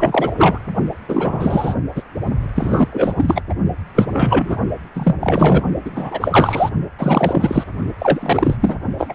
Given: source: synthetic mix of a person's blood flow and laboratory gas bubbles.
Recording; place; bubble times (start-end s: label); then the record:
Doppler ultrasound of blood flow; precordium
0.00-0.58 s: bubbles
1.08-1.75 s: bubbles
1.95-2.02 s: bubbles
2.55-2.88 s: bubbles
2.92-3.42 s: bubbles
3.49-3.54 s: bubbles
3.95-4.57 s: bubbles
4.94-5.15 s: bubbles
5.20-5.62 s: bubbles
5.85-6.70 s: bubbles
6.99-7.64 s: bubbles
8.00-8.57 s: bubbles
8.60-8.76 s: bubbles
8.98-9.15 s: bubbles
From the record:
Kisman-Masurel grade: 333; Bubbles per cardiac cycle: rolling drumbeat, 9 or more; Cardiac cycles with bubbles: 50 to 99%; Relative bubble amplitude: loud (0.450 to 0.775); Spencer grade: 3 (all of the cardiac periods contain showers or single bubble signals, but not dominating or overriding the cardiac motion signals); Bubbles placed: only in the low amplitude regions of the cardiac cycle